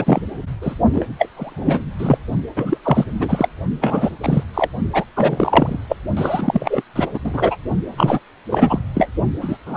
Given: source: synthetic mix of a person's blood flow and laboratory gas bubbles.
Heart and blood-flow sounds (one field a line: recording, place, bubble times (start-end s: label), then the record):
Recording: Doppler ultrasound of blood flow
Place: precordium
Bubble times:
0.00-0.21 s: bubbles
0.61-0.74 s: bubbles
0.93-1.07 s: bubbles
1.19-1.28 s: bubbles
1.36-1.85 s: bubbles
1.99-2.18 s: bubbles
2.56-2.77 s: bubbles
2.84-3.04 s: bubbles
3.19-3.48 s: bubbles
3.81-4.16 s: bubbles
4.23-4.44 s: bubbles
4.54-4.69 s: bubbles
4.92-5.04 s: bubbles
5.15-5.78 s: bubbles
5.89-5.96 s: bubbles
6.17-6.82 s: bubbles
6.96-7.08 s: bubbles
7.14-7.20 s: bubbles
7.24-7.57 s: bubbles
7.92-8.19 s: bubbles
8.50-8.79 s: bubbles
8.94-9.08 s: bubbles
9.41-9.58 s: bubbles
9.65-9.77 s: bubbles
From the record:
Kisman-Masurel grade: 333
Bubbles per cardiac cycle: rolling drumbeat, 9 or more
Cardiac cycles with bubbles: 50 to 99%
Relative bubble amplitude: loud (0.450 to 0.775)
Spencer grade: 3 (all of the cardiac periods contain showers or single bubble signals, but not dominating or overriding the cardiac motion signals)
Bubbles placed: only in the low amplitude regions of the cardiac cycle